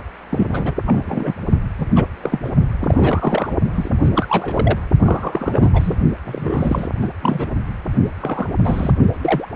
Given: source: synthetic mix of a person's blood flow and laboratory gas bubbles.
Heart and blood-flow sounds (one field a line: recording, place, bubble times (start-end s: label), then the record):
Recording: Doppler ultrasound of blood flow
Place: precordium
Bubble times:
0.29-0.47 s: bubbles
0.50-0.74 s: bubbles
0.85-1.33 s: bubbles
1.78-1.86 s: bubbles
1.95-2.05 s: bubbles
2.21-2.40 s: bubbles
2.44-2.49 s: bubbles
2.80-3.53 s: bubbles
3.74-3.91 s: bubbles
4.04-4.11 s: bubbles
4.15-4.26 s: bubbles
4.29-4.79 s: bubbles
5.04-5.69 s: bubbles
5.74-5.96 s: bubbles
6.24-6.88 s: bubbles
7.02-7.09 s: bubbles
7.22-7.46 s: bubbles
8.20-8.50 s: bubbles
8.63-8.91 s: bubbles
9.22-9.47 s: bubbles
From the record:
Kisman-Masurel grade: 242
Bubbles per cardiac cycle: several, 3 to 8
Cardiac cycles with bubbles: 100%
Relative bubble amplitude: moderate (0.250 to 0.450)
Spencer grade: 3 (all of the cardiac periods contain showers or single bubble signals, but not dominating or overriding the cardiac motion signals)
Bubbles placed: only in the low amplitude regions of the cardiac cycle